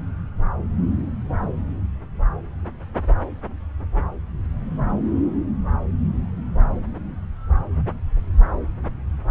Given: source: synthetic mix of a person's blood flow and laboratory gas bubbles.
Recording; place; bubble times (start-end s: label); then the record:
Doppler ultrasound of blood flow; subclavian vein
no bubbles
From the record:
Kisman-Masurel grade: 000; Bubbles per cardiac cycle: 0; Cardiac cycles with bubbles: 0%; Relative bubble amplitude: no bubbles discernible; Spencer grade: 0 (complete lack of bubble signals)